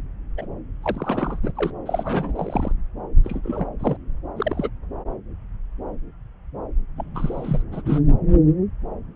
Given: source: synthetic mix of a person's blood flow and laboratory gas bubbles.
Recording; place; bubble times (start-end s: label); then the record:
Doppler ultrasound of blood flow; subclavian vein
0.37-0.47 s: bubbles
0.82-1.52 s: bubbles
1.55-1.71 s: bubbles
1.85-2.71 s: bubbles
3.24-3.69 s: bubbles
3.79-3.97 s: bubbles
4.36-4.69 s: bubbles
6.95-7.62 s: bubbles
7.72-7.82 s: bubbles
7.84-8.02 s: bubbles
From the record:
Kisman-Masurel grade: 332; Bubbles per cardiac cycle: rolling drumbeat, 9 or more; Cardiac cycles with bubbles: 50 to 99%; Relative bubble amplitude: moderate (0.250 to 0.450); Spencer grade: 3 (all of the cardiac periods contain showers or single bubble signals, but not dominating or overriding the cardiac motion signals); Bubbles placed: anywhere in the cardiac cycle